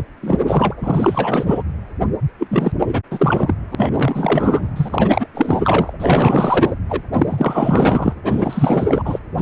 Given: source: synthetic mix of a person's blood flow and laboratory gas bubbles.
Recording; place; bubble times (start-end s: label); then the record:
Doppler ultrasound of blood flow; precordium
0.00-0.03 s: bubbles
0.22-0.39 s: bubbles
0.47-0.74 s: bubbles
0.81-1.62 s: bubbles
2.39-2.72 s: bubbles
2.79-3.00 s: bubbles
3.10-3.54 s: bubbles
3.71-4.70 s: bubbles
4.75-5.27 s: bubbles
5.34-5.93 s: bubbles
5.99-6.73 s: bubbles
6.88-7.03 s: bubbles
7.12-8.13 s: bubbles
8.23-9.19 s: bubbles
9.37-9.42 s: bubbles
From the record:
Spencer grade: 4 (maximum detectable bubble signal sounding continuously throughout systole and diastole of every cardiac period, and overriding the amplitude of the normal cardiac signals); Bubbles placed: anywhere in the cardiac cycle